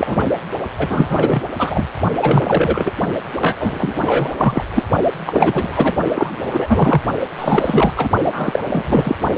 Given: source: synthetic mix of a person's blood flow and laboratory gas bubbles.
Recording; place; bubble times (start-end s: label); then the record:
Doppler ultrasound of blood flow; precordium
0.00-0.29 s: bubbles
0.78-1.48 s: bubbles
1.58-1.86 s: bubbles
2.21-2.92 s: bubbles
3.40-3.56 s: bubbles
3.59-3.94 s: bubbles
4.00-4.33 s: bubbles
4.37-4.63 s: bubbles
4.74-4.83 s: bubbles
5.25-5.96 s: bubbles
6.14-7.02 s: bubbles
7.39-7.92 s: bubbles
7.97-8.08 s: bubbles
8.25-8.59 s: bubbles
8.64-8.83 s: bubbles
8.87-9.15 s: bubbles
From the record:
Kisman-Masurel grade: 343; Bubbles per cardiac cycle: rolling drumbeat, 9 or more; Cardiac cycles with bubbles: 100%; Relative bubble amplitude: loud (0.450 to 0.775); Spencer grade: 3 (all of the cardiac periods contain showers or single bubble signals, but not dominating or overriding the cardiac motion signals); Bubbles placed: only in the low amplitude regions of the cardiac cycle